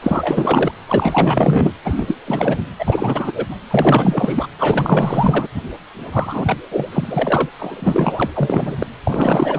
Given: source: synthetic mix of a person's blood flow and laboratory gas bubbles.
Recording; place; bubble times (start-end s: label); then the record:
Doppler ultrasound of blood flow; precordium
0.02-0.72 s: bubbles
0.88-1.73 s: bubbles
1.84-2.16 s: bubbles
2.26-2.62 s: bubbles
2.78-3.32 s: bubbles
3.35-3.46 s: bubbles
3.49-3.56 s: bubbles
3.71-4.47 s: bubbles
4.59-5.48 s: bubbles
6.12-6.57 s: bubbles
6.71-6.88 s: bubbles
6.91-7.49 s: bubbles
7.58-8.30 s: bubbles
8.34-8.87 s: bubbles
9.04-9.58 s: bubbles
From the record:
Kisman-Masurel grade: 444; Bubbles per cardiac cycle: continuous sound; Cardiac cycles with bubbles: 100%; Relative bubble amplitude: maximal (0.775 to 0.999); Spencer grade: 4 (maximum detectable bubble signal sounding continuously throughout systole and diastole of every cardiac period, and overriding the amplitude of the normal cardiac signals); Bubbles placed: anywhere in the cardiac cycle